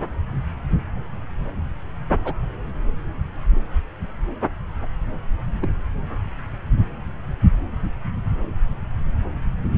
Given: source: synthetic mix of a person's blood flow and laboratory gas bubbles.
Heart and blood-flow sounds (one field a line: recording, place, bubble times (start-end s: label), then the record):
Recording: Doppler ultrasound of blood flow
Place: subclavian vein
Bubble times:
2.25-2.33 s: bubbles
5.62-5.71 s: bubbles
From the record:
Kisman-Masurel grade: 121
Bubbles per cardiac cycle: 1 to 2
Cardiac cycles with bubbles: 10 to 50%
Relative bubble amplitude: barely perceptible (0.100 to 0.250)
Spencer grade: 2 (many but less than half of the cardiac periods contain bubble signals, singularly or in groups)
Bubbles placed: anywhere in the cardiac cycle